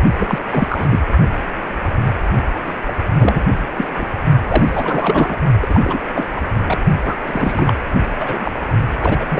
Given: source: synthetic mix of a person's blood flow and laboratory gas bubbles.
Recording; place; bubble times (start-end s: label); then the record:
Doppler ultrasound of blood flow; precordium
0.19-0.39 s: bubbles
0.50-0.88 s: bubbles
0.91-1.00 s: bubbles
2.67-2.73 s: bubbles
2.87-2.92 s: bubbles
3.19-3.44 s: bubbles
3.77-3.91 s: bubbles
3.95-4.05 s: bubbles
4.48-5.38 s: bubbles
5.61-5.99 s: bubbles
6.13-6.29 s: bubbles
6.36-6.42 s: bubbles
6.66-6.79 s: bubbles
7.05-7.15 s: bubbles
7.26-7.74 s: bubbles
8.19-8.51 s: bubbles
9.00-9.25 s: bubbles
9.29-9.40 s: bubbles
From the record:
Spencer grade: 3 (all of the cardiac periods contain showers or single bubble signals, but not dominating or overriding the cardiac motion signals); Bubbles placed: only in the low amplitude regions of the cardiac cycle